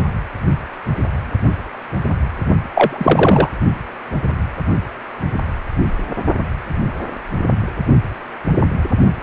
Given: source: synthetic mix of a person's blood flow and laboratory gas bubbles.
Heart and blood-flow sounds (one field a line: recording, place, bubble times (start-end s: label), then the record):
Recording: Doppler ultrasound of blood flow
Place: precordium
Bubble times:
2.74-3.49 s: bubbles
From the record:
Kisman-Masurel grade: 213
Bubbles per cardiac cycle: several, 3 to 8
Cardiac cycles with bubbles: 1 to 10%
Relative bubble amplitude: loud (0.450 to 0.775)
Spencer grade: 1 (occasional bubble signal discernible with the cardiac motion signal, with majority of cardiac periods free of bubbles)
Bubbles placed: only in the low amplitude regions of the cardiac cycle